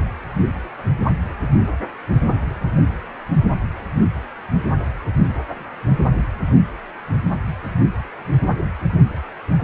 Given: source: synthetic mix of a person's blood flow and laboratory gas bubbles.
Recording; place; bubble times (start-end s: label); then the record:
Doppler ultrasound of blood flow; precordium
no bubbles
From the record:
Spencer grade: 0 (complete lack of bubble signals)